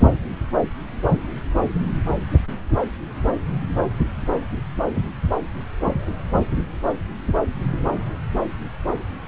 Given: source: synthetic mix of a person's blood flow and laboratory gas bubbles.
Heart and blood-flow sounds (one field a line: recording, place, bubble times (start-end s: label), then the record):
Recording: Doppler ultrasound of blood flow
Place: subclavian vein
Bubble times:
0.00-0.08 s: bubbles
From the record:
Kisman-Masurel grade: 112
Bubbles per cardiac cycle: 1 to 2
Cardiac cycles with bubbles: 1 to 10%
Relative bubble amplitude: moderate (0.250 to 0.450)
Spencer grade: 1 (occasional bubble signal discernible with the cardiac motion signal, with majority of cardiac periods free of bubbles)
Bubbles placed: anywhere in the cardiac cycle